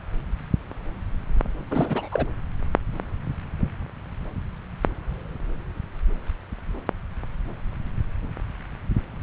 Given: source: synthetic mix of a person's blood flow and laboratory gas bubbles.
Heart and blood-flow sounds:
Doppler ultrasound of blood flow; subclavian vein
1.70-2.08 s: bubbles
2.11-2.26 s: bubbles
From the record:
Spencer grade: 2 (many but less than half of the cardiac periods contain bubble signals, singularly or in groups); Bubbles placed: anywhere in the cardiac cycle

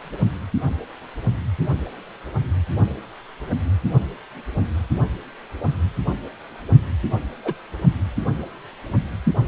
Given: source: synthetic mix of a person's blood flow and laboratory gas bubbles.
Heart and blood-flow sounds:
Doppler ultrasound of blood flow; precordium
7.44-7.54 s: bubbles
From the record:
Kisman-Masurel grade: 112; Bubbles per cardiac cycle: 1 to 2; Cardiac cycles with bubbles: 1 to 10%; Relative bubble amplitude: moderate (0.250 to 0.450); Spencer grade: 1 (occasional bubble signal discernible with the cardiac motion signal, with majority of cardiac periods free of bubbles); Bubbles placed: only in the low amplitude regions of the cardiac cycle

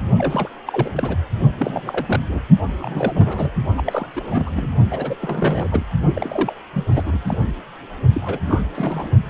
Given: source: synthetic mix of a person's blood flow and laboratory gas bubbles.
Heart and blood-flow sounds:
Doppler ultrasound of blood flow; precordium
0.18-0.49 s: bubbles
0.66-0.90 s: bubbles
0.95-1.16 s: bubbles
1.59-2.20 s: bubbles
2.29-2.40 s: bubbles
2.79-3.51 s: bubbles
3.77-3.82 s: bubbles
3.85-4.07 s: bubbles
4.11-4.69 s: bubbles
4.91-5.16 s: bubbles
5.21-5.68 s: bubbles
5.71-5.86 s: bubbles
6.14-6.53 s: bubbles
6.73-6.84 s: bubbles
6.92-7.53 s: bubbles
8.14-8.40 s: bubbles
8.46-8.62 s: bubbles
8.75-9.10 s: bubbles
From the record:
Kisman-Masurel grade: 332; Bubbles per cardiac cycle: rolling drumbeat, 9 or more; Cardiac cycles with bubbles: 50 to 99%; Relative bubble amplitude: moderate (0.250 to 0.450); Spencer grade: 3 (all of the cardiac periods contain showers or single bubble signals, but not dominating or overriding the cardiac motion signals); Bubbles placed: only in the low amplitude regions of the cardiac cycle

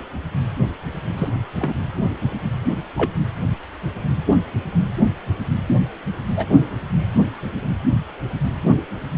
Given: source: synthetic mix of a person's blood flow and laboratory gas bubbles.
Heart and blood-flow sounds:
Doppler ultrasound of blood flow; precordium
1.16-1.29 s: bubbles
1.59-1.79 s: bubbles
2.77-2.83 s: bubbles
2.97-3.12 s: bubbles
6.36-6.47 s: bubbles
From the record:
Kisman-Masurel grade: 122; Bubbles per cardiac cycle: 1 to 2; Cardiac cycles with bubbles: 10 to 50%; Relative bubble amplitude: moderate (0.250 to 0.450); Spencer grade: 2 (many but less than half of the cardiac periods contain bubble signals, singularly or in groups); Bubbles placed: anywhere in the cardiac cycle

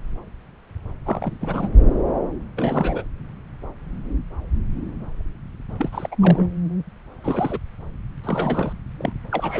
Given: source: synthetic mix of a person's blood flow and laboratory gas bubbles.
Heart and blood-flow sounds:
Doppler ultrasound of blood flow; subclavian vein
1.06-1.38 s: bubbles
1.41-1.68 s: bubbles
2.56-3.03 s: bubbles
5.78-6.15 s: bubbles
6.19-6.47 s: bubbles
7.23-7.59 s: bubbles
8.24-8.73 s: bubbles
8.97-9.12 s: bubbles
9.31-9.60 s: bubbles
From the record:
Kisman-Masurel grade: 332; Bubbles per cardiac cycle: rolling drumbeat, 9 or more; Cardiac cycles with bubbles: 50 to 99%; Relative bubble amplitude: moderate (0.250 to 0.450); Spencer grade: 3 (all of the cardiac periods contain showers or single bubble signals, but not dominating or overriding the cardiac motion signals); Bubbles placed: anywhere in the cardiac cycle

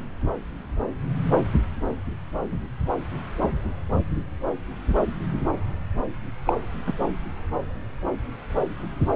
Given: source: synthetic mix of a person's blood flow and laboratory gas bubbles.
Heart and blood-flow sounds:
Doppler ultrasound of blood flow; subclavian vein
6.45-6.53 s: bubbles
6.87-6.93 s: bubbles
From the record:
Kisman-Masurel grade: 112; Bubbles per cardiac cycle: 1 to 2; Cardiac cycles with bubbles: 1 to 10%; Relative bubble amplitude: moderate (0.250 to 0.450); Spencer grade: 1 (occasional bubble signal discernible with the cardiac motion signal, with majority of cardiac periods free of bubbles); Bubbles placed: anywhere in the cardiac cycle

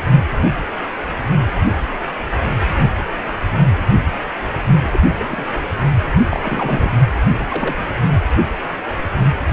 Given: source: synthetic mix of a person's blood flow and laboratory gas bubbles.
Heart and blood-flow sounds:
Doppler ultrasound of blood flow; precordium
4.92-5.00 s: bubbles
5.12-5.46 s: bubbles
6.31-6.90 s: bubbles
7.22-7.27 s: bubbles
7.38-7.44 s: bubbles
7.48-7.88 s: bubbles
From the record:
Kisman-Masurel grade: 222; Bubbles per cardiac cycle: several, 3 to 8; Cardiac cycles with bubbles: 10 to 50%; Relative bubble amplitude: moderate (0.250 to 0.450); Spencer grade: 2 (many but less than half of the cardiac periods contain bubble signals, singularly or in groups); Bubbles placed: only in the low amplitude regions of the cardiac cycle

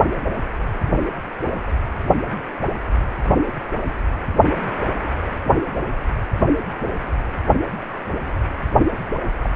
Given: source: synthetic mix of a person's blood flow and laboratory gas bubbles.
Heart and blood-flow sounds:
Doppler ultrasound of blood flow; precordium
0.81-0.89 s: bubbles
9.42-9.49 s: bubbles
From the record:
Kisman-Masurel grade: 121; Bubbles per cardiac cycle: 1 to 2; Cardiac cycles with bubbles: 10 to 50%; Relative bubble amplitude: barely perceptible (0.100 to 0.250); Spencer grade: 2 (many but less than half of the cardiac periods contain bubble signals, singularly or in groups); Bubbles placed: only in the low amplitude regions of the cardiac cycle

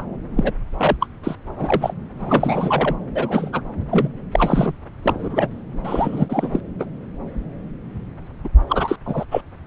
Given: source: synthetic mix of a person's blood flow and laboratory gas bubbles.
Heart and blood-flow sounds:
Doppler ultrasound of blood flow; subclavian vein
0.00-0.03 s: bubbles
0.36-0.52 s: bubbles
0.78-0.97 s: bubbles
1.00-1.07 s: bubbles
1.24-1.35 s: bubbles
1.56-1.93 s: bubbles
2.19-2.95 s: bubbles
3.15-3.61 s: bubbles
3.91-4.08 s: bubbles
4.31-4.74 s: bubbles
5.02-5.47 s: bubbles
5.84-6.48 s: bubbles
6.51-6.60 s: bubbles
6.79-6.85 s: bubbles
8.44-8.49 s: bubbles
8.69-8.96 s: bubbles
9.06-9.25 s: bubbles
9.31-9.42 s: bubbles
From the record:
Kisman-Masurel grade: 333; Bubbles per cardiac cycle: rolling drumbeat, 9 or more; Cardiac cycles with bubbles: 50 to 99%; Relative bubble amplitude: loud (0.450 to 0.775); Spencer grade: 3 (all of the cardiac periods contain showers or single bubble signals, but not dominating or overriding the cardiac motion signals); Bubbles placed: anywhere in the cardiac cycle

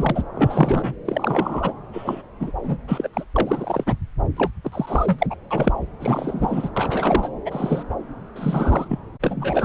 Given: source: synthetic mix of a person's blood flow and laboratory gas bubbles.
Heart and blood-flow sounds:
Doppler ultrasound of blood flow; subclavian vein
0.00-0.23 s: bubbles
0.35-0.93 s: bubbles
1.05-1.73 s: bubbles
1.93-2.22 s: bubbles
2.40-2.52 s: bubbles
2.63-2.77 s: bubbles
2.88-3.08 s: bubbles
3.13-3.25 s: bubbles
3.36-3.95 s: bubbles
4.37-4.50 s: bubbles
4.64-5.26 s: bubbles
5.30-5.35 s: bubbles
5.50-5.72 s: bubbles
6.00-6.70 s: bubbles
6.76-7.29 s: bubbles
7.45-7.83 s: bubbles
8.36-8.98 s: bubbles
9.21-9.65 s: bubbles
From the record:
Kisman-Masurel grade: 242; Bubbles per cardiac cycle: several, 3 to 8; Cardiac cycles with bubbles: 100%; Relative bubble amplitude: moderate (0.250 to 0.450); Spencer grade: 3 (all of the cardiac periods contain showers or single bubble signals, but not dominating or overriding the cardiac motion signals); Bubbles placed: anywhere in the cardiac cycle

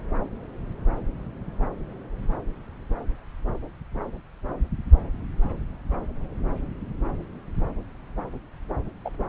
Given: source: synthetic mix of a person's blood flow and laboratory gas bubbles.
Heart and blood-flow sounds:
Doppler ultrasound of blood flow; subclavian vein
9.04-9.10 s: bubbles
From the record:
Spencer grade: 1 (occasional bubble signal discernible with the cardiac motion signal, with majority of cardiac periods free of bubbles); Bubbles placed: anywhere in the cardiac cycle

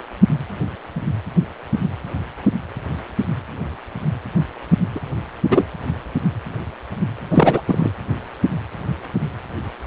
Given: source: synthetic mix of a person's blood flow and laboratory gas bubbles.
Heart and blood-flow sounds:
Doppler ultrasound of blood flow; precordium
4.95-5.00 s: bubbles
5.50-5.64 s: bubbles
7.29-7.61 s: bubbles
7.67-7.92 s: bubbles
From the record:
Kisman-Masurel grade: 223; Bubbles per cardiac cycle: several, 3 to 8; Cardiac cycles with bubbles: 10 to 50%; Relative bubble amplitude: loud (0.450 to 0.775); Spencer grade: 2 (many but less than half of the cardiac periods contain bubble signals, singularly or in groups); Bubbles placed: anywhere in the cardiac cycle

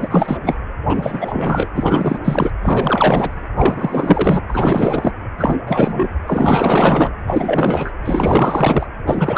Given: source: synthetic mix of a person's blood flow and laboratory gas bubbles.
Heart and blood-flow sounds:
Doppler ultrasound of blood flow; precordium
0.00-0.57 s: bubbles
0.89-1.69 s: bubbles
1.74-2.19 s: bubbles
2.24-2.51 s: bubbles
2.63-3.42 s: bubbles
3.57-4.41 s: bubbles
4.48-5.14 s: bubbles
5.38-5.55 s: bubbles
5.67-6.08 s: bubbles
6.27-7.12 s: bubbles
7.26-7.91 s: bubbles
8.02-8.87 s: bubbles
9.06-9.38 s: bubbles
From the record:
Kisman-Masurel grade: 444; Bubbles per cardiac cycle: continuous sound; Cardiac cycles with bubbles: 100%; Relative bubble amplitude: maximal (0.775 to 0.999); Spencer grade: 4 (maximum detectable bubble signal sounding continuously throughout systole and diastole of every cardiac period, and overriding the amplitude of the normal cardiac signals); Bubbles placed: anywhere in the cardiac cycle

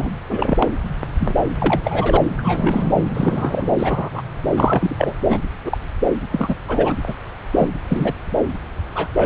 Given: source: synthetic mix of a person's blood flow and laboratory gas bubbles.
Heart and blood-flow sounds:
Doppler ultrasound of blood flow; subclavian vein
0.00-0.09 s: bubbles
0.29-0.70 s: bubbles
1.20-1.35 s: bubbles
1.59-1.81 s: bubbles
1.84-2.17 s: bubbles
2.38-2.93 s: bubbles
3.14-3.70 s: bubbles
3.78-4.09 s: bubbles
4.12-4.23 s: bubbles
4.56-5.13 s: bubbles
5.28-5.38 s: bubbles
5.64-5.78 s: bubbles
6.31-6.55 s: bubbles
6.67-6.93 s: bubbles
7.07-7.14 s: bubbles
7.56-7.70 s: bubbles
7.89-8.13 s: bubbles
8.95-9.09 s: bubbles
9.16-9.26 s: bubbles
From the record:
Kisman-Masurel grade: 243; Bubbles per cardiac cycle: several, 3 to 8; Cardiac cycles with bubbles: 100%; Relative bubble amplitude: loud (0.450 to 0.775); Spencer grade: 3 (all of the cardiac periods contain showers or single bubble signals, but not dominating or overriding the cardiac motion signals); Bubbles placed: anywhere in the cardiac cycle

